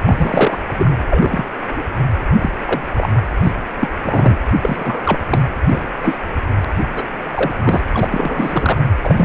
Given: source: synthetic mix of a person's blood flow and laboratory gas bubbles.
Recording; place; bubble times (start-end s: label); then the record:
Doppler ultrasound of blood flow; precordium
0.07-0.60 s: bubbles
0.74-0.95 s: bubbles
1.10-1.46 s: bubbles
1.76-1.82 s: bubbles
2.39-2.51 s: bubbles
2.65-2.81 s: bubbles
2.88-3.07 s: bubbles
3.44-3.53 s: bubbles
3.81-3.88 s: bubbles
4.04-4.37 s: bubbles
4.50-5.19 s: bubbles
5.29-5.48 s: bubbles
5.67-5.83 s: bubbles
6.03-6.19 s: bubbles
6.96-7.04 s: bubbles
7.31-7.54 s: bubbles
7.60-7.87 s: bubbles
7.93-8.80 s: bubbles
9.04-9.25 s: bubbles
From the record:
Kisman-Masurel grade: 233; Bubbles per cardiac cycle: several, 3 to 8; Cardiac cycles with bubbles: 50 to 99%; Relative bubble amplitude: loud (0.450 to 0.775); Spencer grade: 3 (all of the cardiac periods contain showers or single bubble signals, but not dominating or overriding the cardiac motion signals); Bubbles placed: anywhere in the cardiac cycle